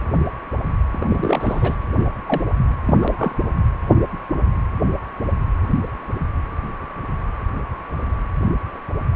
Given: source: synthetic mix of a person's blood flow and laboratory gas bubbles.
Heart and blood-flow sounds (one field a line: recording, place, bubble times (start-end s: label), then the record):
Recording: Doppler ultrasound of blood flow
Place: precordium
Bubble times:
0.91-1.76 s: bubbles
1.99-2.03 s: bubbles
2.27-2.42 s: bubbles
2.85-2.97 s: bubbles
3.00-3.34 s: bubbles
From the record:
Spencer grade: 2 (many but less than half of the cardiac periods contain bubble signals, singularly or in groups)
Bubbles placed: anywhere in the cardiac cycle